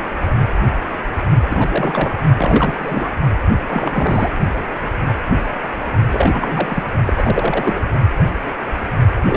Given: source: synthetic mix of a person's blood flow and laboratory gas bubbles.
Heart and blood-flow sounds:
Doppler ultrasound of blood flow; precordium
1.50-2.19 s: bubbles
2.38-3.15 s: bubbles
3.67-4.30 s: bubbles
6.12-6.83 s: bubbles
7.07-7.79 s: bubbles
9.26-9.36 s: bubbles
From the record:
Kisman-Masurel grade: 332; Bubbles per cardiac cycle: rolling drumbeat, 9 or more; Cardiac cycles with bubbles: 50 to 99%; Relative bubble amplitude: moderate (0.250 to 0.450); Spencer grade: 3 (all of the cardiac periods contain showers or single bubble signals, but not dominating or overriding the cardiac motion signals); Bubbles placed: only in the low amplitude regions of the cardiac cycle

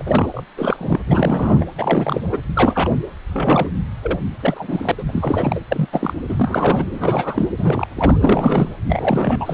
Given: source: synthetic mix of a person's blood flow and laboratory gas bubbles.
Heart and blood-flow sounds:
Doppler ultrasound of blood flow; precordium
0.00-0.44 s: bubbles
0.57-1.00 s: bubbles
1.06-1.65 s: bubbles
1.77-2.23 s: bubbles
2.32-2.39 s: bubbles
2.56-2.96 s: bubbles
3.28-3.68 s: bubbles
4.01-4.20 s: bubbles
4.39-4.92 s: bubbles
4.98-5.04 s: bubbles
5.06-5.60 s: bubbles
5.69-5.88 s: bubbles
5.92-6.13 s: bubbles
6.29-6.87 s: bubbles
6.93-7.48 s: bubbles
7.58-7.87 s: bubbles
7.97-8.74 s: bubbles
8.87-9.54 s: bubbles
From the record:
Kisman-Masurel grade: 342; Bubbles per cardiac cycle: rolling drumbeat, 9 or more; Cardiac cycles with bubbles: 100%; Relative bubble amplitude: moderate (0.250 to 0.450); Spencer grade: 3 (all of the cardiac periods contain showers or single bubble signals, but not dominating or overriding the cardiac motion signals); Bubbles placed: anywhere in the cardiac cycle

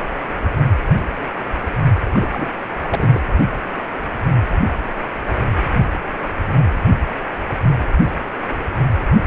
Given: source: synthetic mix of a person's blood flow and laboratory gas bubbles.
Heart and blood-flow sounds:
Doppler ultrasound of blood flow; precordium
2.10-2.50 s: bubbles
2.82-3.20 s: bubbles
From the record:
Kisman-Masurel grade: 212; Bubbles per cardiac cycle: several, 3 to 8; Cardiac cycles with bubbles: 1 to 10%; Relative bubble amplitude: moderate (0.250 to 0.450); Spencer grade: 1 (occasional bubble signal discernible with the cardiac motion signal, with majority of cardiac periods free of bubbles); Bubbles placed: anywhere in the cardiac cycle

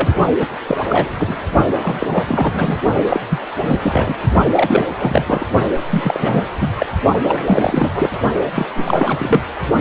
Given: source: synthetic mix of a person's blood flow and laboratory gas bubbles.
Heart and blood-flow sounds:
Doppler ultrasound of blood flow; precordium
0.00-0.14 s: bubbles
0.39-0.47 s: bubbles
0.67-0.77 s: bubbles
0.89-1.09 s: bubbles
1.18-1.39 s: bubbles
1.82-2.07 s: bubbles
2.10-2.80 s: bubbles
3.08-3.20 s: bubbles
3.30-3.39 s: bubbles
3.64-3.80 s: bubbles
3.82-4.15 s: bubbles
4.57-5.46 s: bubbles
5.91-6.42 s: bubbles
6.59-6.69 s: bubbles
6.77-6.87 s: bubbles
7.23-8.09 s: bubbles
8.54-8.66 s: bubbles
8.74-9.43 s: bubbles
From the record:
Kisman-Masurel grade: 343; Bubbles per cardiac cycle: rolling drumbeat, 9 or more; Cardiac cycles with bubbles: 100%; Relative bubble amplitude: loud (0.450 to 0.775); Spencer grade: 3 (all of the cardiac periods contain showers or single bubble signals, but not dominating or overriding the cardiac motion signals); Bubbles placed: only in the low amplitude regions of the cardiac cycle

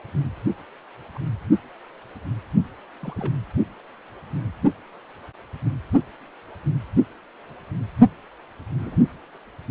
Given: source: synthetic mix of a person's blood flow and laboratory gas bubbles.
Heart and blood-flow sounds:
Doppler ultrasound of blood flow; precordium
1.15-1.18 s: bubbles
3.01-3.33 s: bubbles
8.79-8.97 s: bubbles
From the record:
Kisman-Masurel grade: 121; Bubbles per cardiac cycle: 1 to 2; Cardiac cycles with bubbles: 10 to 50%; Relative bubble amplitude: barely perceptible (0.100 to 0.250); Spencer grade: 2 (many but less than half of the cardiac periods contain bubble signals, singularly or in groups); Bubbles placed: only in the low amplitude regions of the cardiac cycle

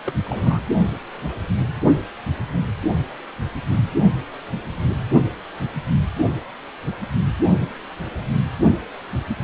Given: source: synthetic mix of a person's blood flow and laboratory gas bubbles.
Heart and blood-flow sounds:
Doppler ultrasound of blood flow; precordium
0.06-0.13 s: bubbles
0.24-0.60 s: bubbles
From the record:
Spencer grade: 1 (occasional bubble signal discernible with the cardiac motion signal, with majority of cardiac periods free of bubbles); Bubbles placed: only in the low amplitude regions of the cardiac cycle

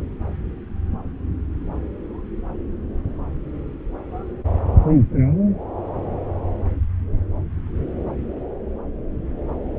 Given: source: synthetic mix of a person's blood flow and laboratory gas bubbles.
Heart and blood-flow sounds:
Doppler ultrasound of blood flow; subclavian vein
no bubbles
From the record:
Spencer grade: 0 (complete lack of bubble signals)

